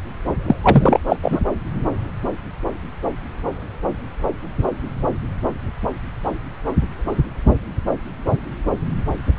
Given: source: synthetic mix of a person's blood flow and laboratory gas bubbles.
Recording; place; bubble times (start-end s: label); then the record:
Doppler ultrasound of blood flow; subclavian vein
0.48-0.56 s: bubbles
0.64-0.99 s: bubbles
1.09-1.17 s: bubbles
1.22-1.41 s: bubbles
From the record:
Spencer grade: 1 (occasional bubble signal discernible with the cardiac motion signal, with majority of cardiac periods free of bubbles); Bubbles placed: anywhere in the cardiac cycle